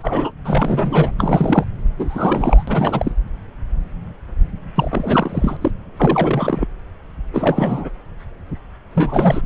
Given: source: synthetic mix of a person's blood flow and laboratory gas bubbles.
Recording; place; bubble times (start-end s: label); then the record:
Doppler ultrasound of blood flow; subclavian vein
0.03-0.32 s: bubbles
0.45-1.10 s: bubbles
1.18-1.65 s: bubbles
1.98-2.64 s: bubbles
2.67-3.12 s: bubbles
4.75-5.57 s: bubbles
5.61-5.72 s: bubbles
5.97-6.68 s: bubbles
7.33-7.90 s: bubbles
8.95-9.41 s: bubbles
From the record:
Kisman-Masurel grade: 332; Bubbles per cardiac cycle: rolling drumbeat, 9 or more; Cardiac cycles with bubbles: 50 to 99%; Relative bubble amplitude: moderate (0.250 to 0.450); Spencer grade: 3 (all of the cardiac periods contain showers or single bubble signals, but not dominating or overriding the cardiac motion signals); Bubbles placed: anywhere in the cardiac cycle